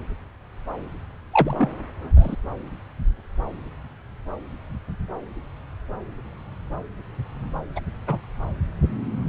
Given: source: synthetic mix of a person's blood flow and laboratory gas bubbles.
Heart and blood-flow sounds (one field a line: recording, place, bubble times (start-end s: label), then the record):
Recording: Doppler ultrasound of blood flow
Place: subclavian vein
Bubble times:
1.32-1.69 s: bubbles
2.15-2.35 s: bubbles
7.75-7.80 s: bubbles
8.07-8.19 s: bubbles
From the record:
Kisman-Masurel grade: 122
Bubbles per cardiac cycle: 1 to 2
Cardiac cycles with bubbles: 10 to 50%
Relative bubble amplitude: moderate (0.250 to 0.450)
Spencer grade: 2 (many but less than half of the cardiac periods contain bubble signals, singularly or in groups)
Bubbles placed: anywhere in the cardiac cycle